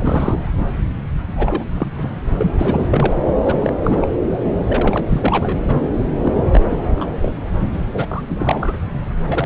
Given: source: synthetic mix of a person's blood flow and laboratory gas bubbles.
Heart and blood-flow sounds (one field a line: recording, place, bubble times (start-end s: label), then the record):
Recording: Doppler ultrasound of blood flow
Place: subclavian vein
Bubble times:
0.00-0.70 s: bubbles
1.35-1.65 s: bubbles
1.74-1.87 s: bubbles
1.97-2.10 s: bubbles
2.37-2.51 s: bubbles
2.58-3.23 s: bubbles
3.41-3.74 s: bubbles
3.83-4.07 s: bubbles
4.67-5.05 s: bubbles
5.09-5.58 s: bubbles
5.67-5.81 s: bubbles
6.23-6.43 s: bubbles
6.52-6.78 s: bubbles
6.95-7.08 s: bubbles
7.21-7.36 s: bubbles
7.73-7.80 s: bubbles
7.92-8.06 s: bubbles
8.11-8.22 s: bubbles
8.29-8.77 s: bubbles
9.27-9.46 s: bubbles
From the record:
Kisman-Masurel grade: 342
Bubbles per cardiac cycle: rolling drumbeat, 9 or more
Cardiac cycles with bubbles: 100%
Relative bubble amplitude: moderate (0.250 to 0.450)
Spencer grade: 3 (all of the cardiac periods contain showers or single bubble signals, but not dominating or overriding the cardiac motion signals)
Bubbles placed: anywhere in the cardiac cycle